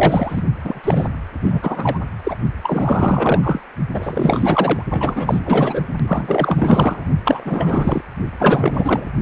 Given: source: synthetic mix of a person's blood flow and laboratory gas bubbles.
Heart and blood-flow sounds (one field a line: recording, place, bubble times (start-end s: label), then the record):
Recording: Doppler ultrasound of blood flow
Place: precordium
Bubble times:
0.00-0.42 s: bubbles
0.64-1.08 s: bubbles
1.41-2.00 s: bubbles
2.23-2.37 s: bubbles
2.62-3.61 s: bubbles
3.93-4.83 s: bubbles
4.90-5.83 s: bubbles
6.07-7.07 s: bubbles
7.25-8.01 s: bubbles
8.38-9.09 s: bubbles
From the record:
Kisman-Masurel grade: 444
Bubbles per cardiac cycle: continuous sound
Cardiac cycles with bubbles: 100%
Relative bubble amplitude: maximal (0.775 to 0.999)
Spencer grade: 4 (maximum detectable bubble signal sounding continuously throughout systole and diastole of every cardiac period, and overriding the amplitude of the normal cardiac signals)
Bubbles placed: only in the low amplitude regions of the cardiac cycle